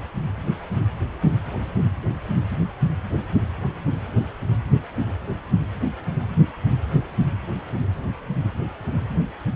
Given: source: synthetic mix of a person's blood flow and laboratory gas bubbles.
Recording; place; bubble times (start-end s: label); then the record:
Doppler ultrasound of blood flow; precordium
no bubbles
From the record:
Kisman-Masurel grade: 000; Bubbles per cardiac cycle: 0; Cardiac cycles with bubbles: 0%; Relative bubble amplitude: no bubbles discernible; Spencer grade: 0 (complete lack of bubble signals)